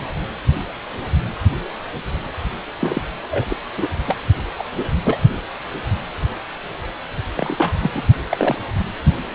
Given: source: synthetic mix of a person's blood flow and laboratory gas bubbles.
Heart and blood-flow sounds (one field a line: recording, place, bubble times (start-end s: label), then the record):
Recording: Doppler ultrasound of blood flow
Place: precordium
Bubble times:
2.80-3.02 s: bubbles
3.30-3.46 s: bubbles
3.49-3.57 s: bubbles
3.78-3.88 s: bubbles
4.06-4.17 s: bubbles
4.58-4.64 s: bubbles
4.77-4.84 s: bubbles
5.04-5.20 s: bubbles
7.37-7.72 s: bubbles
7.79-7.91 s: bubbles
7.94-8.06 s: bubbles
8.29-8.58 s: bubbles
From the record:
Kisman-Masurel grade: 222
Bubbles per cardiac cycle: several, 3 to 8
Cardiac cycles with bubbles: 10 to 50%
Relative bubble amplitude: moderate (0.250 to 0.450)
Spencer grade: 2 (many but less than half of the cardiac periods contain bubble signals, singularly or in groups)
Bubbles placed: anywhere in the cardiac cycle